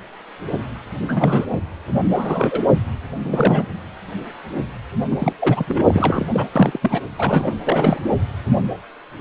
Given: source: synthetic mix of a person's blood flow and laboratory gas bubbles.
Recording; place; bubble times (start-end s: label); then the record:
Doppler ultrasound of blood flow; precordium
1.08-1.46 s: bubbles
2.15-2.60 s: bubbles
3.24-3.66 s: bubbles
5.10-5.33 s: bubbles
5.39-5.84 s: bubbles
5.89-6.29 s: bubbles
6.33-6.47 s: bubbles
6.55-6.78 s: bubbles
6.82-7.00 s: bubbles
7.16-7.57 s: bubbles
7.65-8.00 s: bubbles
From the record:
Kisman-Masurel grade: 332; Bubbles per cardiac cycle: rolling drumbeat, 9 or more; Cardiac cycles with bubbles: 50 to 99%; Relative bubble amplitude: moderate (0.250 to 0.450); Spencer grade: 3 (all of the cardiac periods contain showers or single bubble signals, but not dominating or overriding the cardiac motion signals); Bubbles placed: anywhere in the cardiac cycle